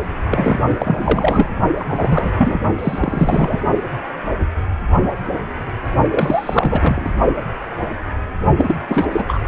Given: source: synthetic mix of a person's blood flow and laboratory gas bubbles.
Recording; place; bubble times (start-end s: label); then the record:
Doppler ultrasound of blood flow; precordium
0.27-0.59 s: bubbles
0.79-1.49 s: bubbles
1.76-2.60 s: bubbles
2.78-3.61 s: bubbles
6.11-7.10 s: bubbles
8.56-8.75 s: bubbles
8.88-9.05 s: bubbles
9.12-9.25 s: bubbles
9.28-9.40 s: bubbles
From the record:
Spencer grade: 3 (all of the cardiac periods contain showers or single bubble signals, but not dominating or overriding the cardiac motion signals); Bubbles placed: only in the low amplitude regions of the cardiac cycle